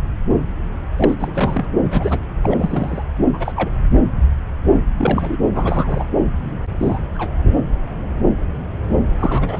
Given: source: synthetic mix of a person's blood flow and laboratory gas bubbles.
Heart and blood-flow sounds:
Doppler ultrasound of blood flow; subclavian vein
0.96-1.14 s: bubbles
1.19-1.65 s: bubbles
1.90-2.19 s: bubbles
2.42-3.04 s: bubbles
3.33-3.52 s: bubbles
3.55-3.71 s: bubbles
4.98-5.37 s: bubbles
5.54-6.04 s: bubbles
6.79-6.99 s: bubbles
7.15-7.33 s: bubbles
9.19-9.60 s: bubbles
From the record:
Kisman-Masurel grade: 232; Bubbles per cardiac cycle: several, 3 to 8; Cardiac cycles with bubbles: 50 to 99%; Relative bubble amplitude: moderate (0.250 to 0.450); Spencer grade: 3 (all of the cardiac periods contain showers or single bubble signals, but not dominating or overriding the cardiac motion signals); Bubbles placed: anywhere in the cardiac cycle

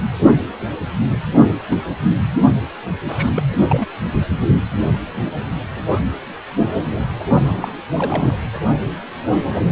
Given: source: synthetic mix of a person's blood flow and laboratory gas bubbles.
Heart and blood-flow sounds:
Doppler ultrasound of blood flow; precordium
1.70-1.81 s: bubbles
3.08-3.29 s: bubbles
3.35-3.43 s: bubbles
3.52-3.57 s: bubbles
3.69-3.88 s: bubbles
7.39-7.77 s: bubbles
7.96-8.37 s: bubbles
From the record:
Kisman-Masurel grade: 222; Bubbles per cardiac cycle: several, 3 to 8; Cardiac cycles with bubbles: 10 to 50%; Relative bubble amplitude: moderate (0.250 to 0.450); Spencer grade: 2 (many but less than half of the cardiac periods contain bubble signals, singularly or in groups); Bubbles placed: anywhere in the cardiac cycle

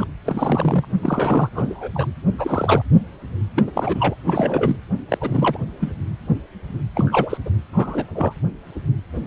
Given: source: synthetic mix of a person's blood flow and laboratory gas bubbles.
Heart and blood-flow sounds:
Doppler ultrasound of blood flow; precordium
0.00-0.07 s: bubbles
0.24-0.85 s: bubbles
1.02-1.49 s: bubbles
1.52-1.88 s: bubbles
1.94-2.07 s: bubbles
2.38-2.82 s: bubbles
3.56-3.70 s: bubbles
3.73-4.15 s: bubbles
4.24-4.76 s: bubbles
5.08-5.18 s: bubbles
5.21-5.58 s: bubbles
5.80-5.95 s: bubbles
6.96-7.38 s: bubbles
7.46-7.50 s: bubbles
7.73-8.05 s: bubbles
8.15-8.33 s: bubbles
From the record:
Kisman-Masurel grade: 232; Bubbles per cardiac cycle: several, 3 to 8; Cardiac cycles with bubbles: 50 to 99%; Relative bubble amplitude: moderate (0.250 to 0.450); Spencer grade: 3 (all of the cardiac periods contain showers or single bubble signals, but not dominating or overriding the cardiac motion signals); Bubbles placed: anywhere in the cardiac cycle

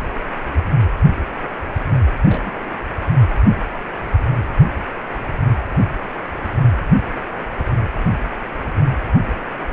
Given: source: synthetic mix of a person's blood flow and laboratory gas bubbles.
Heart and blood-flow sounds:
Doppler ultrasound of blood flow; precordium
2.25-2.63 s: bubbles
From the record:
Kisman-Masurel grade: 111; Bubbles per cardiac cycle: 1 to 2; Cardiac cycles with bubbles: 1 to 10%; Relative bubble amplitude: barely perceptible (0.100 to 0.250); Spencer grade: 1 (occasional bubble signal discernible with the cardiac motion signal, with majority of cardiac periods free of bubbles); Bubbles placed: anywhere in the cardiac cycle

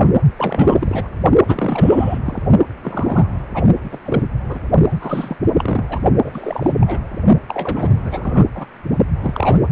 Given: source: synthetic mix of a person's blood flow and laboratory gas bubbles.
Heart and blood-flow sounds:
Doppler ultrasound of blood flow; precordium
0.36-1.08 s: bubbles
1.44-2.19 s: bubbles
2.25-2.42 s: bubbles
2.81-3.27 s: bubbles
3.54-3.64 s: bubbles
3.83-3.99 s: bubbles
4.05-4.23 s: bubbles
4.49-4.59 s: bubbles
4.89-5.36 s: bubbles
5.50-5.84 s: bubbles
5.88-6.00 s: bubbles
6.24-6.73 s: bubbles
6.80-7.00 s: bubbles
7.47-8.45 s: bubbles
8.54-8.66 s: bubbles
9.21-9.60 s: bubbles
From the record:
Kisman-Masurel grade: 343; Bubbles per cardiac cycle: rolling drumbeat, 9 or more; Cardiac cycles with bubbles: 100%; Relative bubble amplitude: loud (0.450 to 0.775); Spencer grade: 3 (all of the cardiac periods contain showers or single bubble signals, but not dominating or overriding the cardiac motion signals); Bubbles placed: only in the low amplitude regions of the cardiac cycle

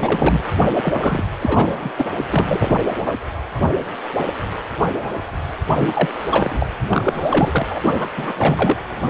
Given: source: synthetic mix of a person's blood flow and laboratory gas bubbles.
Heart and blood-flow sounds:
Doppler ultrasound of blood flow; precordium
0.00-0.43 s: bubbles
0.82-1.23 s: bubbles
1.40-1.92 s: bubbles
1.97-2.06 s: bubbles
2.31-2.77 s: bubbles
2.98-3.14 s: bubbles
5.77-6.09 s: bubbles
6.14-6.66 s: bubbles
6.89-7.66 s: bubbles
7.71-7.79 s: bubbles
8.00-8.10 s: bubbles
8.16-8.33 s: bubbles
8.38-8.76 s: bubbles
From the record:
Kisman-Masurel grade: 332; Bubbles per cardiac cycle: rolling drumbeat, 9 or more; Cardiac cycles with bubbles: 50 to 99%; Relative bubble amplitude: moderate (0.250 to 0.450); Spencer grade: 3 (all of the cardiac periods contain showers or single bubble signals, but not dominating or overriding the cardiac motion signals); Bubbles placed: only in the low amplitude regions of the cardiac cycle

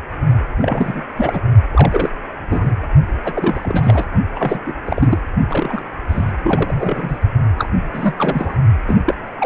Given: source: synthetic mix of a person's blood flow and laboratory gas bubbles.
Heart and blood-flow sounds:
Doppler ultrasound of blood flow; precordium
0.57-1.00 s: bubbles
1.15-1.41 s: bubbles
1.72-2.10 s: bubbles
2.49-2.74 s: bubbles
3.24-4.04 s: bubbles
4.35-4.59 s: bubbles
4.65-4.73 s: bubbles
4.85-5.19 s: bubbles
5.48-5.83 s: bubbles
6.08-6.32 s: bubbles
6.43-7.18 s: bubbles
7.58-7.69 s: bubbles
7.93-8.56 s: bubbles
8.87-8.96 s: bubbles
9.06-9.14 s: bubbles
9.39-9.46 s: bubbles
From the record:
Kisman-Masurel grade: 342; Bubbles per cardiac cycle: rolling drumbeat, 9 or more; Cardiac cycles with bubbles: 100%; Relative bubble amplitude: moderate (0.250 to 0.450); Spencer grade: 3 (all of the cardiac periods contain showers or single bubble signals, but not dominating or overriding the cardiac motion signals); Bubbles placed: only in the low amplitude regions of the cardiac cycle

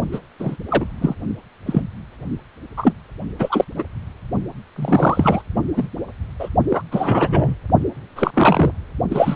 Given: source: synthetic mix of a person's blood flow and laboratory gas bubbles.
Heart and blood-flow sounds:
Doppler ultrasound of blood flow; precordium
0.12-0.19 s: bubbles
0.39-0.56 s: bubbles
0.68-0.86 s: bubbles
1.00-1.15 s: bubbles
1.66-1.81 s: bubbles
2.77-2.93 s: bubbles
3.39-3.65 s: bubbles
3.75-3.84 s: bubbles
4.75-5.42 s: bubbles
5.55-5.62 s: bubbles
5.75-5.88 s: bubbles
6.40-6.49 s: bubbles
6.70-6.83 s: bubbles
6.91-7.55 s: bubbles
8.15-8.31 s: bubbles
8.33-8.71 s: bubbles
9.10-9.36 s: bubbles
From the record:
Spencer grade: 3 (all of the cardiac periods contain showers or single bubble signals, but not dominating or overriding the cardiac motion signals); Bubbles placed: only in the low amplitude regions of the cardiac cycle

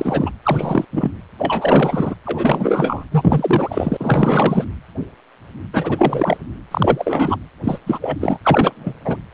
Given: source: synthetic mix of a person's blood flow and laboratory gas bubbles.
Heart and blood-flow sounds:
Doppler ultrasound of blood flow; precordium
0.00-0.30 s: bubbles
0.43-0.85 s: bubbles
0.92-1.11 s: bubbles
1.38-2.14 s: bubbles
2.25-3.04 s: bubbles
3.11-4.64 s: bubbles
5.73-6.37 s: bubbles
6.71-7.36 s: bubbles
7.63-7.78 s: bubbles
7.86-7.98 s: bubbles
8.01-8.16 s: bubbles
8.21-8.38 s: bubbles
8.44-8.95 s: bubbles
9.05-9.16 s: bubbles
From the record:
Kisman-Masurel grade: 333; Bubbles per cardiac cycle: rolling drumbeat, 9 or more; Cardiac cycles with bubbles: 50 to 99%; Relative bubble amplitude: loud (0.450 to 0.775); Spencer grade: 3 (all of the cardiac periods contain showers or single bubble signals, but not dominating or overriding the cardiac motion signals); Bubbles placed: anywhere in the cardiac cycle

